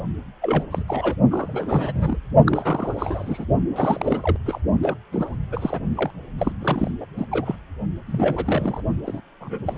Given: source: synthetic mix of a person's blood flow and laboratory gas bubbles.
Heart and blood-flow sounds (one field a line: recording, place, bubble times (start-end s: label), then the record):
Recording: Doppler ultrasound of blood flow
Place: precordium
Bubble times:
0.41-0.64 s: bubbles
0.71-0.83 s: bubbles
0.88-1.15 s: bubbles
1.30-2.17 s: bubbles
2.46-3.44 s: bubbles
3.76-4.37 s: bubbles
4.46-4.59 s: bubbles
4.82-4.97 s: bubbles
5.12-5.37 s: bubbles
5.52-5.80 s: bubbles
5.95-6.11 s: bubbles
6.38-6.52 s: bubbles
6.60-6.91 s: bubbles
7.00-7.05 s: bubbles
7.16-7.25 s: bubbles
7.31-7.56 s: bubbles
8.06-8.83 s: bubbles
9.06-9.21 s: bubbles
9.40-9.78 s: bubbles
From the record:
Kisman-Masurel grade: 342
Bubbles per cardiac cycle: rolling drumbeat, 9 or more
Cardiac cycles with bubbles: 100%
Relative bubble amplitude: moderate (0.250 to 0.450)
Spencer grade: 3 (all of the cardiac periods contain showers or single bubble signals, but not dominating or overriding the cardiac motion signals)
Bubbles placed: only in the low amplitude regions of the cardiac cycle